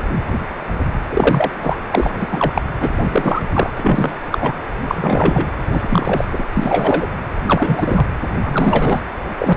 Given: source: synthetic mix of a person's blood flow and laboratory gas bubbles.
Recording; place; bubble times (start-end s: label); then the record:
Doppler ultrasound of blood flow; precordium
1.09-1.51 s: bubbles
1.60-1.75 s: bubbles
1.91-2.27 s: bubbles
2.31-2.62 s: bubbles
2.80-3.43 s: bubbles
3.52-3.70 s: bubbles
3.77-4.13 s: bubbles
4.31-4.53 s: bubbles
4.84-5.48 s: bubbles
5.71-6.25 s: bubbles
6.29-6.44 s: bubbles
6.54-7.07 s: bubbles
7.47-8.06 s: bubbles
8.44-9.01 s: bubbles
9.39-9.54 s: bubbles
From the record:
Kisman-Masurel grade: 333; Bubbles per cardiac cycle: rolling drumbeat, 9 or more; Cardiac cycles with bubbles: 50 to 99%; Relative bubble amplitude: loud (0.450 to 0.775); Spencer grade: 3 (all of the cardiac periods contain showers or single bubble signals, but not dominating or overriding the cardiac motion signals); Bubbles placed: anywhere in the cardiac cycle